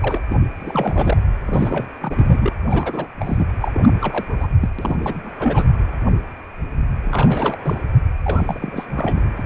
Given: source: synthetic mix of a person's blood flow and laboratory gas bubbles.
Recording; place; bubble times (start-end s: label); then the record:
Doppler ultrasound of blood flow; precordium
0.00-0.18 s: bubbles
0.29-0.36 s: bubbles
0.60-1.20 s: bubbles
1.47-1.86 s: bubbles
2.00-2.52 s: bubbles
2.66-3.08 s: bubbles
3.19-3.45 s: bubbles
3.60-3.92 s: bubbles
4.01-4.47 s: bubbles
4.61-4.69 s: bubbles
4.79-5.31 s: bubbles
5.39-5.66 s: bubbles
7.04-7.57 s: bubbles
7.64-7.81 s: bubbles
8.23-8.87 s: bubbles
8.95-9.21 s: bubbles
9.36-9.43 s: bubbles
From the record:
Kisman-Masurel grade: 332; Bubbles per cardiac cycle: rolling drumbeat, 9 or more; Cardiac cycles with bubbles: 50 to 99%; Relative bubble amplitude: moderate (0.250 to 0.450); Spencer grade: 3 (all of the cardiac periods contain showers or single bubble signals, but not dominating or overriding the cardiac motion signals); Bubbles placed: anywhere in the cardiac cycle